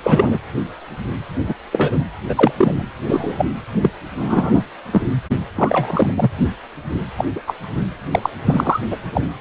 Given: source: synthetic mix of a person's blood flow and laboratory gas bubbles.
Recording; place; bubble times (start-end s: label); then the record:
Doppler ultrasound of blood flow; precordium
0.03-0.37 s: bubbles
1.44-1.54 s: bubbles
1.72-1.99 s: bubbles
2.29-2.52 s: bubbles
2.58-2.83 s: bubbles
3.08-3.46 s: bubbles
3.82-3.90 s: bubbles
4.17-4.62 s: bubbles
4.92-5.01 s: bubbles
5.55-6.13 s: bubbles
6.17-6.31 s: bubbles
7.17-7.24 s: bubbles
7.35-7.40 s: bubbles
7.47-7.53 s: bubbles
8.11-8.20 s: bubbles
8.22-8.29 s: bubbles
8.46-8.80 s: bubbles
8.91-8.96 s: bubbles
9.14-9.21 s: bubbles
From the record:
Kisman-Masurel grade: 233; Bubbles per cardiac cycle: several, 3 to 8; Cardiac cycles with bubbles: 50 to 99%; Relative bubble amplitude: loud (0.450 to 0.775); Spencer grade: 3 (all of the cardiac periods contain showers or single bubble signals, but not dominating or overriding the cardiac motion signals); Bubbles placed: anywhere in the cardiac cycle